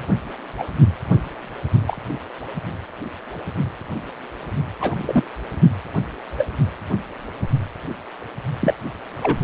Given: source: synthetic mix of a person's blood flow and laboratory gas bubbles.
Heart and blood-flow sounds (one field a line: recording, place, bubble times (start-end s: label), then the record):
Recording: Doppler ultrasound of blood flow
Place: precordium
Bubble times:
0.57-0.64 s: bubbles
1.87-1.97 s: bubbles
4.80-5.22 s: bubbles
6.38-6.46 s: bubbles
8.60-8.74 s: bubbles
9.21-9.37 s: bubbles
From the record:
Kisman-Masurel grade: 122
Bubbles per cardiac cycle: 1 to 2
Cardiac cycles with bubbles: 10 to 50%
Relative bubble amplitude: moderate (0.250 to 0.450)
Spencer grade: 2 (many but less than half of the cardiac periods contain bubble signals, singularly or in groups)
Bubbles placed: only in the low amplitude regions of the cardiac cycle